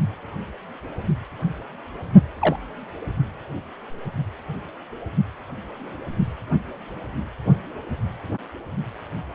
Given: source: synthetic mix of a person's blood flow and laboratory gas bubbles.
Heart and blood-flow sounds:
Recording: Doppler ultrasound of blood flow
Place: precordium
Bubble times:
2.40-2.56 s: bubbles
From the record:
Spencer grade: 1 (occasional bubble signal discernible with the cardiac motion signal, with majority of cardiac periods free of bubbles)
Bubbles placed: only in the low amplitude regions of the cardiac cycle

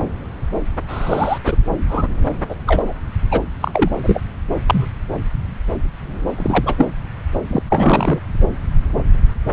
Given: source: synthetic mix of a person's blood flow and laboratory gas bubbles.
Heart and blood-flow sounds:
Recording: Doppler ultrasound of blood flow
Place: subclavian vein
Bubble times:
0.88-1.39 s: bubbles
1.45-1.56 s: bubbles
1.89-2.08 s: bubbles
2.49-2.55 s: bubbles
2.67-2.83 s: bubbles
2.86-2.93 s: bubbles
3.31-3.42 s: bubbles
3.60-3.90 s: bubbles
4.03-4.20 s: bubbles
4.66-4.87 s: bubbles
6.37-6.86 s: bubbles
7.48-7.62 s: bubbles
7.69-8.20 s: bubbles
From the record:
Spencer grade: 3 (all of the cardiac periods contain showers or single bubble signals, but not dominating or overriding the cardiac motion signals)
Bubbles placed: anywhere in the cardiac cycle

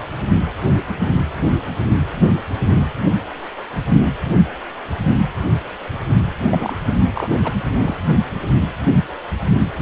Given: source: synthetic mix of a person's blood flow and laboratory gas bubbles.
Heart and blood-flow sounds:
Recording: Doppler ultrasound of blood flow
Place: precordium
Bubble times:
6.47-6.76 s: bubbles
7.13-7.28 s: bubbles
7.42-7.54 s: bubbles
7.81-7.96 s: bubbles
8.12-8.21 s: bubbles
From the record:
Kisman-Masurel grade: 222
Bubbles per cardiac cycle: several, 3 to 8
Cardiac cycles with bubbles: 10 to 50%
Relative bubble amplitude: moderate (0.250 to 0.450)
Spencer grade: 2 (many but less than half of the cardiac periods contain bubble signals, singularly or in groups)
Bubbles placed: anywhere in the cardiac cycle

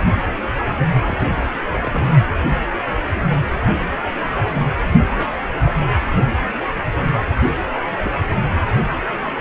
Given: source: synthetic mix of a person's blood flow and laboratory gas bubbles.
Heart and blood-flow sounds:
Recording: Doppler ultrasound of blood flow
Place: precordium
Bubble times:
1.08-1.30 s: bubbles
1.38-1.60 s: bubbles
1.82-2.05 s: bubbles
5.18-5.32 s: bubbles
5.38-5.46 s: bubbles
5.62-5.72 s: bubbles
5.81-5.90 s: bubbles
7.92-8.17 s: bubbles
From the record:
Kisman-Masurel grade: 221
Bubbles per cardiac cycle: several, 3 to 8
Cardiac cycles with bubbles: 10 to 50%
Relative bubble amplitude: barely perceptible (0.100 to 0.250)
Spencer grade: 2 (many but less than half of the cardiac periods contain bubble signals, singularly or in groups)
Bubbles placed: anywhere in the cardiac cycle

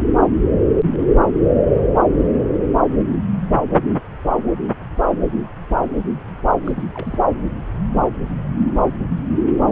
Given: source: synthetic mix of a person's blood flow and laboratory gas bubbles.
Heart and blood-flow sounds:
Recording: Doppler ultrasound of blood flow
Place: subclavian vein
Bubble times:
6.64-6.71 s: bubbles
6.75-6.83 s: bubbles
6.94-7.25 s: bubbles
From the record:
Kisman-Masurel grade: 211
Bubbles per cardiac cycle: several, 3 to 8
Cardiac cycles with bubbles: 1 to 10%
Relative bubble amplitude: barely perceptible (0.100 to 0.250)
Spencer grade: 1 (occasional bubble signal discernible with the cardiac motion signal, with majority of cardiac periods free of bubbles)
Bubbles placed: anywhere in the cardiac cycle

